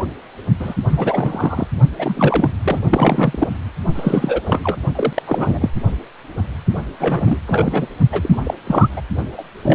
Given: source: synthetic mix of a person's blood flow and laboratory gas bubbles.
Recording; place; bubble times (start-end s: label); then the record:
Doppler ultrasound of blood flow; precordium
0.59-0.75 s: bubbles
0.89-1.66 s: bubbles
1.99-2.48 s: bubbles
2.62-2.80 s: bubbles
2.91-3.49 s: bubbles
3.94-4.41 s: bubbles
4.46-4.77 s: bubbles
4.95-5.23 s: bubbles
5.27-5.70 s: bubbles
6.99-7.38 s: bubbles
7.46-7.88 s: bubbles
8.12-8.36 s: bubbles
8.44-8.54 s: bubbles
8.67-8.89 s: bubbles
8.96-9.02 s: bubbles
9.38-9.43 s: bubbles
9.63-9.75 s: bubbles
From the record:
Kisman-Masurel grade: 332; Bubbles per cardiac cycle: rolling drumbeat, 9 or more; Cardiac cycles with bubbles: 50 to 99%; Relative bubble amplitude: moderate (0.250 to 0.450); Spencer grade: 3 (all of the cardiac periods contain showers or single bubble signals, but not dominating or overriding the cardiac motion signals); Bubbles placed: only in the low amplitude regions of the cardiac cycle